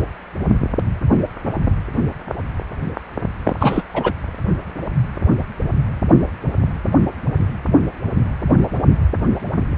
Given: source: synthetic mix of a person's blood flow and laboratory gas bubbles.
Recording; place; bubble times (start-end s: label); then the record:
Doppler ultrasound of blood flow; precordium
3.44-3.55 s: bubbles
3.59-3.82 s: bubbles
3.94-4.12 s: bubbles
From the record:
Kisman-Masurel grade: 213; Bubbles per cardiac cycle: several, 3 to 8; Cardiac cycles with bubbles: 1 to 10%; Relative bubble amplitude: loud (0.450 to 0.775); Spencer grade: 1 (occasional bubble signal discernible with the cardiac motion signal, with majority of cardiac periods free of bubbles); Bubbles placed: only in the low amplitude regions of the cardiac cycle